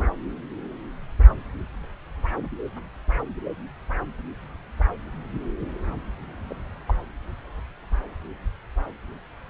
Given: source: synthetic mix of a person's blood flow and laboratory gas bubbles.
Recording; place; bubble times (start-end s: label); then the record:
Doppler ultrasound of blood flow; subclavian vein
6.50-6.54 s: bubbles
6.87-6.94 s: bubbles
From the record:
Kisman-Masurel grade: 121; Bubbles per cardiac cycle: 1 to 2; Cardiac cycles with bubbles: 10 to 50%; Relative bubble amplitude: barely perceptible (0.100 to 0.250); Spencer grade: 2 (many but less than half of the cardiac periods contain bubble signals, singularly or in groups); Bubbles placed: anywhere in the cardiac cycle